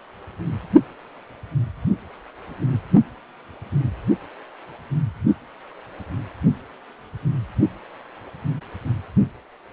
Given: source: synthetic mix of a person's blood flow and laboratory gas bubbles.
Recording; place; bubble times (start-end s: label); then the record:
Doppler ultrasound of blood flow; precordium
no bubbles
From the record:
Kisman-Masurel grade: 000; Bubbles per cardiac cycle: 0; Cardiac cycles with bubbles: 0%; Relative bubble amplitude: no bubbles discernible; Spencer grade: 0 (complete lack of bubble signals)